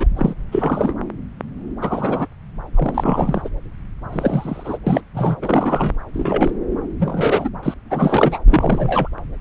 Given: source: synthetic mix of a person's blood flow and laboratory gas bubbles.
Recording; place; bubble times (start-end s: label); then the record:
Doppler ultrasound of blood flow; subclavian vein
0.00-0.06 s: bubbles
0.16-0.33 s: bubbles
0.52-0.94 s: bubbles
1.81-2.27 s: bubbles
2.75-3.42 s: bubbles
3.44-3.48 s: bubbles
4.12-4.78 s: bubbles
4.87-5.01 s: bubbles
5.14-5.37 s: bubbles
5.42-5.96 s: bubbles
6.14-6.50 s: bubbles
6.99-7.49 s: bubbles
7.62-7.74 s: bubbles
7.90-8.38 s: bubbles
8.48-9.09 s: bubbles
From the record:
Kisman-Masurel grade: 232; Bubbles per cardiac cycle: several, 3 to 8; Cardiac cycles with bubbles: 50 to 99%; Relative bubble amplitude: moderate (0.250 to 0.450); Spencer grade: 3 (all of the cardiac periods contain showers or single bubble signals, but not dominating or overriding the cardiac motion signals); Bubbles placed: anywhere in the cardiac cycle